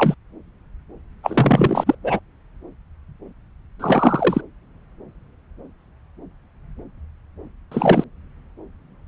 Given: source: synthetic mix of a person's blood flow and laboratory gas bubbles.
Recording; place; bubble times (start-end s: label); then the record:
Doppler ultrasound of blood flow; subclavian vein
0.00-0.15 s: bubbles
1.23-1.95 s: bubbles
2.04-2.20 s: bubbles
3.79-4.41 s: bubbles
7.71-8.04 s: bubbles
From the record:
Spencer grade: 2 (many but less than half of the cardiac periods contain bubble signals, singularly or in groups); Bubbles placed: anywhere in the cardiac cycle